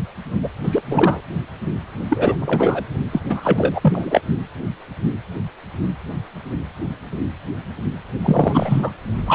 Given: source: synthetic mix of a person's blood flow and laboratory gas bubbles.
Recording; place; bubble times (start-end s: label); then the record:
Doppler ultrasound of blood flow; precordium
0.43-0.48 s: bubbles
0.64-0.82 s: bubbles
0.87-1.21 s: bubbles
2.09-2.36 s: bubbles
2.39-2.82 s: bubbles
3.12-3.20 s: bubbles
3.28-4.21 s: bubbles
8.23-8.90 s: bubbles
9.27-9.35 s: bubbles
From the record:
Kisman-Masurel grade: 333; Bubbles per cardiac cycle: rolling drumbeat, 9 or more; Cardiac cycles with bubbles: 50 to 99%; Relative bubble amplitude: loud (0.450 to 0.775); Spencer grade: 3 (all of the cardiac periods contain showers or single bubble signals, but not dominating or overriding the cardiac motion signals); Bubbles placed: only in the low amplitude regions of the cardiac cycle